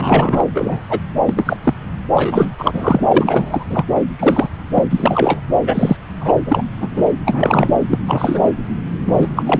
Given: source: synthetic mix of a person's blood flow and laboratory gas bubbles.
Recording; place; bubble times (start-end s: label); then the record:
Doppler ultrasound of blood flow; subclavian vein
0.00-0.44 s: bubbles
0.54-0.81 s: bubbles
0.89-0.99 s: bubbles
1.25-1.33 s: bubbles
1.36-1.56 s: bubbles
1.64-1.74 s: bubbles
2.14-2.47 s: bubbles
2.58-3.05 s: bubbles
3.09-3.64 s: bubbles
3.70-3.85 s: bubbles
3.92-4.05 s: bubbles
4.19-4.48 s: bubbles
4.74-4.83 s: bubbles
4.90-5.40 s: bubbles
5.67-5.96 s: bubbles
6.20-6.32 s: bubbles
6.46-6.62 s: bubbles
6.81-6.88 s: bubbles
6.96-7.03 s: bubbles
7.06-7.10 s: bubbles
7.25-7.79 s: bubbles
7.90-7.98 s: bubbles
8.07-8.51 s: bubbles
9.05-9.43 s: bubbles
9.46-9.59 s: bubbles
From the record:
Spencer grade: 3 (all of the cardiac periods contain showers or single bubble signals, but not dominating or overriding the cardiac motion signals); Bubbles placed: anywhere in the cardiac cycle